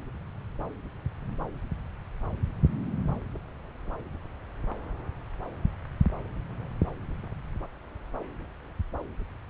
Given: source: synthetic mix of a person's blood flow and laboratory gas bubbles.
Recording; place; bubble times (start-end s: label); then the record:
Doppler ultrasound of blood flow; subclavian vein
no bubbles
From the record:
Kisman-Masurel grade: 000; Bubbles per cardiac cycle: 0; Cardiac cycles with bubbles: 0%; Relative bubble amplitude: no bubbles discernible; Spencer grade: 0 (complete lack of bubble signals)